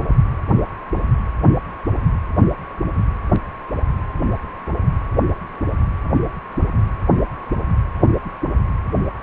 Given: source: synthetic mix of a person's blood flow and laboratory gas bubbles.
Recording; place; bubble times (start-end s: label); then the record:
Doppler ultrasound of blood flow; precordium
no bubbles
From the record:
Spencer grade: 0 (complete lack of bubble signals)